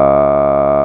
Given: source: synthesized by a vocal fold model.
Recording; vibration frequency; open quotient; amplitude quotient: sustained vowel; 70 Hz; 0.2; 1.3